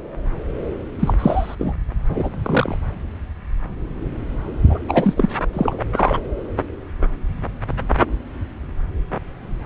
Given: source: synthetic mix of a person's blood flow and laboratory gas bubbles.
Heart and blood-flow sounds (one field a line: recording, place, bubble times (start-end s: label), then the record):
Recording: Doppler ultrasound of blood flow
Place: subclavian vein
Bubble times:
1.00-1.14 s: bubbles
1.18-1.55 s: bubbles
1.58-1.73 s: bubbles
2.08-2.29 s: bubbles
2.44-2.75 s: bubbles
4.70-4.80 s: bubbles
4.88-5.29 s: bubbles
5.53-5.84 s: bubbles
5.95-6.19 s: bubbles
From the record:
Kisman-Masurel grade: 223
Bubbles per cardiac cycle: several, 3 to 8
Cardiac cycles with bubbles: 10 to 50%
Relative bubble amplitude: loud (0.450 to 0.775)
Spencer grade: 2 (many but less than half of the cardiac periods contain bubble signals, singularly or in groups)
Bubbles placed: anywhere in the cardiac cycle